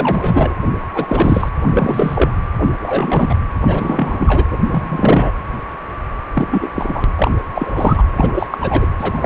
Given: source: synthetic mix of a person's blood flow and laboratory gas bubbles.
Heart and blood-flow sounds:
Doppler ultrasound of blood flow; precordium
0.00-0.54 s: bubbles
0.94-1.49 s: bubbles
1.61-2.30 s: bubbles
2.58-2.69 s: bubbles
2.80-3.34 s: bubbles
3.67-4.44 s: bubbles
4.50-4.58 s: bubbles
4.71-5.32 s: bubbles
6.33-6.47 s: bubbles
6.51-6.70 s: bubbles
6.75-7.06 s: bubbles
7.18-7.31 s: bubbles
7.55-8.04 s: bubbles
8.16-8.32 s: bubbles
8.35-8.46 s: bubbles
8.51-8.58 s: bubbles
8.60-8.87 s: bubbles
8.98-9.26 s: bubbles
From the record:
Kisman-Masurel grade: 333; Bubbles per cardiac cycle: rolling drumbeat, 9 or more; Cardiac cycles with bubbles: 50 to 99%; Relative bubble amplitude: loud (0.450 to 0.775); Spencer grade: 3 (all of the cardiac periods contain showers or single bubble signals, but not dominating or overriding the cardiac motion signals); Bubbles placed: anywhere in the cardiac cycle

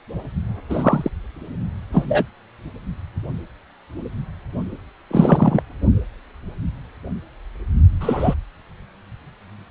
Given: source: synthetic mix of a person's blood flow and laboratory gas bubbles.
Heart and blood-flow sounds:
Doppler ultrasound of blood flow; precordium
0.69-1.09 s: bubbles
1.92-2.27 s: bubbles
5.10-5.62 s: bubbles
8.00-8.35 s: bubbles
From the record:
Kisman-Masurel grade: 123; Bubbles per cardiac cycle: 1 to 2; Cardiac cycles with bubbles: 10 to 50%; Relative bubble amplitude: loud (0.450 to 0.775); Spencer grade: 2 (many but less than half of the cardiac periods contain bubble signals, singularly or in groups); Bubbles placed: only in the low amplitude regions of the cardiac cycle

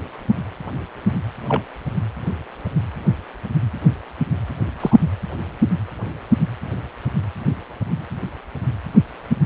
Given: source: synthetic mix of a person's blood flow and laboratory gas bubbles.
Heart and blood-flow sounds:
Doppler ultrasound of blood flow; precordium
1.47-1.62 s: bubbles
4.80-4.97 s: bubbles
From the record:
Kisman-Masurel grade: 112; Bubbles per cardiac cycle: 1 to 2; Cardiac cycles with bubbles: 1 to 10%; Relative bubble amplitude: moderate (0.250 to 0.450); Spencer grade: 1 (occasional bubble signal discernible with the cardiac motion signal, with majority of cardiac periods free of bubbles); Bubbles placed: anywhere in the cardiac cycle

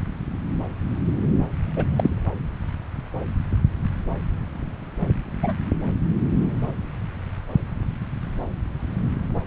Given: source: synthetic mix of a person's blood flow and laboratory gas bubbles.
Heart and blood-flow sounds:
Doppler ultrasound of blood flow; subclavian vein
1.77-1.85 s: bubbles
1.96-2.10 s: bubbles
5.42-5.54 s: bubbles
From the record:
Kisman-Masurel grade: 122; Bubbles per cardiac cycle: 1 to 2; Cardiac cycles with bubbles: 10 to 50%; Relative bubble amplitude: moderate (0.250 to 0.450); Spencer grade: 2 (many but less than half of the cardiac periods contain bubble signals, singularly or in groups); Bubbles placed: anywhere in the cardiac cycle

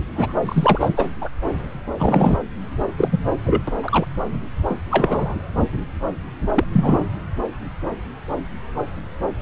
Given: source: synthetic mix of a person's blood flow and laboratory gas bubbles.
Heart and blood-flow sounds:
Doppler ultrasound of blood flow; subclavian vein
0.15-0.33 s: bubbles
0.45-0.89 s: bubbles
0.96-1.06 s: bubbles
1.21-1.29 s: bubbles
1.97-2.38 s: bubbles
2.97-3.08 s: bubbles
3.11-3.19 s: bubbles
3.46-3.62 s: bubbles
3.67-3.71 s: bubbles
3.82-4.05 s: bubbles
4.69-4.78 s: bubbles
4.91-5.35 s: bubbles
6.54-6.64 s: bubbles
6.73-7.04 s: bubbles
From the record:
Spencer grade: 3 (all of the cardiac periods contain showers or single bubble signals, but not dominating or overriding the cardiac motion signals); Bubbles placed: anywhere in the cardiac cycle

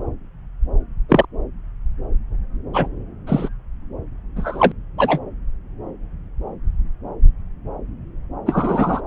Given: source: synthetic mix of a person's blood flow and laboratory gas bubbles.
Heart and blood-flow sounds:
Doppler ultrasound of blood flow; subclavian vein
1.08-1.25 s: bubbles
2.74-2.87 s: bubbles
3.26-3.49 s: bubbles
4.36-4.73 s: bubbles
4.98-5.20 s: bubbles
8.46-9.01 s: bubbles
From the record:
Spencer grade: 2 (many but less than half of the cardiac periods contain bubble signals, singularly or in groups); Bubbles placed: anywhere in the cardiac cycle

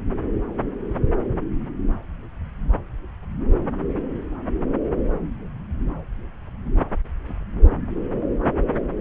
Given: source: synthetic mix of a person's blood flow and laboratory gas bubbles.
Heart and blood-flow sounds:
Doppler ultrasound of blood flow; subclavian vein
no bubbles
From the record:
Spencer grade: 0 (complete lack of bubble signals)

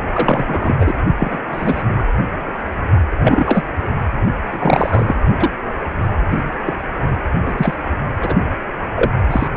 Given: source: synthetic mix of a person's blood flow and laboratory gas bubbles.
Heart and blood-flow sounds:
Doppler ultrasound of blood flow; precordium
0.13-0.73 s: bubbles
0.79-0.93 s: bubbles
1.18-1.38 s: bubbles
1.51-1.83 s: bubbles
1.97-2.04 s: bubbles
3.10-3.64 s: bubbles
4.50-5.20 s: bubbles
5.39-5.50 s: bubbles
6.29-6.44 s: bubbles
6.67-6.73 s: bubbles
7.46-7.53 s: bubbles
7.57-7.76 s: bubbles
8.21-8.36 s: bubbles
8.96-9.11 s: bubbles
9.30-9.47 s: bubbles
From the record:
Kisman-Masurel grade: 243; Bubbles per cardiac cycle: several, 3 to 8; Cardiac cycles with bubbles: 100%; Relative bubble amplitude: loud (0.450 to 0.775); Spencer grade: 3 (all of the cardiac periods contain showers or single bubble signals, but not dominating or overriding the cardiac motion signals); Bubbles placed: only in the low amplitude regions of the cardiac cycle

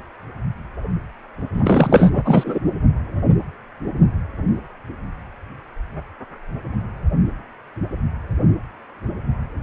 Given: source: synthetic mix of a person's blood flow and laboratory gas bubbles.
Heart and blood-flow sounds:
Doppler ultrasound of blood flow; precordium
1.53-2.59 s: bubbles
From the record:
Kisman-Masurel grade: 223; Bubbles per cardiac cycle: several, 3 to 8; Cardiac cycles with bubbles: 10 to 50%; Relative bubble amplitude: loud (0.450 to 0.775); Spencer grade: 2 (many but less than half of the cardiac periods contain bubble signals, singularly or in groups); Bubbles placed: anywhere in the cardiac cycle

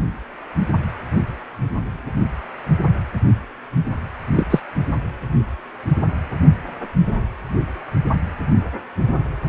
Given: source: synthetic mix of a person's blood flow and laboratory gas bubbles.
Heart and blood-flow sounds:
Doppler ultrasound of blood flow; precordium
4.36-4.46 s: bubbles
4.50-4.60 s: bubbles
From the record:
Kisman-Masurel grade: 113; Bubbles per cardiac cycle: 1 to 2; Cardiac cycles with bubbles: 1 to 10%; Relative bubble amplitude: loud (0.450 to 0.775); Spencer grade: 1 (occasional bubble signal discernible with the cardiac motion signal, with majority of cardiac periods free of bubbles); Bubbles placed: anywhere in the cardiac cycle

